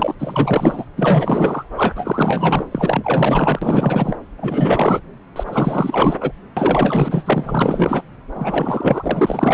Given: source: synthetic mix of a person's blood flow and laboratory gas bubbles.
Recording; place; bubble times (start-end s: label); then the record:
Doppler ultrasound of blood flow; subclavian vein
0.00-0.15 s: bubbles
0.19-0.85 s: bubbles
0.97-1.64 s: bubbles
1.76-2.65 s: bubbles
2.71-4.17 s: bubbles
4.38-5.00 s: bubbles
5.35-6.15 s: bubbles
6.21-6.32 s: bubbles
6.56-8.02 s: bubbles
8.35-9.54 s: bubbles
From the record:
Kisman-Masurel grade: 444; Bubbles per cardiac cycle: continuous sound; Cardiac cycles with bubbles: 100%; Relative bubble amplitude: maximal (0.775 to 0.999); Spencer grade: 4 (maximum detectable bubble signal sounding continuously throughout systole and diastole of every cardiac period, and overriding the amplitude of the normal cardiac signals); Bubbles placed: anywhere in the cardiac cycle